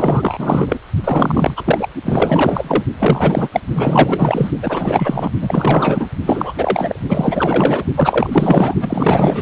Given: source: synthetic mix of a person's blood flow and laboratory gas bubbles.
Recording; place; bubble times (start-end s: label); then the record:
Doppler ultrasound of blood flow; precordium
0.00-0.79 s: bubbles
1.04-1.88 s: bubbles
2.04-2.83 s: bubbles
2.98-3.49 s: bubbles
3.52-3.60 s: bubbles
3.74-4.51 s: bubbles
4.62-5.31 s: bubbles
5.41-6.07 s: bubbles
6.26-6.53 s: bubbles
6.57-7.00 s: bubbles
7.08-7.84 s: bubbles
7.96-8.74 s: bubbles
8.80-9.42 s: bubbles
From the record:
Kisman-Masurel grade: 444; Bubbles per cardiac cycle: continuous sound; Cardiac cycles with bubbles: 100%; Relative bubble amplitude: maximal (0.775 to 0.999); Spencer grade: 4 (maximum detectable bubble signal sounding continuously throughout systole and diastole of every cardiac period, and overriding the amplitude of the normal cardiac signals); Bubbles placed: only in the low amplitude regions of the cardiac cycle